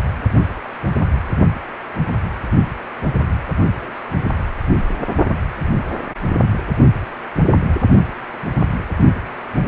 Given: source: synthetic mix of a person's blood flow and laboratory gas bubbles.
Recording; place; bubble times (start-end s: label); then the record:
Doppler ultrasound of blood flow; precordium
3.76-4.00 s: bubbles
From the record:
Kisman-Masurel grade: 111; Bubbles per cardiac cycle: 1 to 2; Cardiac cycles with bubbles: 1 to 10%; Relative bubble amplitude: barely perceptible (0.100 to 0.250); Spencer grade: 1 (occasional bubble signal discernible with the cardiac motion signal, with majority of cardiac periods free of bubbles); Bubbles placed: only in the low amplitude regions of the cardiac cycle